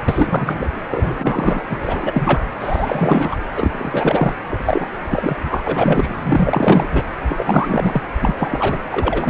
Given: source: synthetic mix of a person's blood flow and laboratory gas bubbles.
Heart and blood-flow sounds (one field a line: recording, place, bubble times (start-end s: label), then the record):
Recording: Doppler ultrasound of blood flow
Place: precordium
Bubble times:
0.08-0.69 s: bubbles
0.90-1.63 s: bubbles
1.70-2.40 s: bubbles
2.59-3.36 s: bubbles
3.55-4.34 s: bubbles
4.48-4.88 s: bubbles
5.10-5.37 s: bubbles
5.50-6.15 s: bubbles
6.22-6.87 s: bubbles
6.93-7.04 s: bubbles
7.29-8.02 s: bubbles
8.20-8.35 s: bubbles
8.37-8.78 s: bubbles
8.92-9.30 s: bubbles
From the record:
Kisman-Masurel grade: 343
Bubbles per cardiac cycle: rolling drumbeat, 9 or more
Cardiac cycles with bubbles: 100%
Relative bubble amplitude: loud (0.450 to 0.775)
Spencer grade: 3 (all of the cardiac periods contain showers or single bubble signals, but not dominating or overriding the cardiac motion signals)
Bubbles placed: anywhere in the cardiac cycle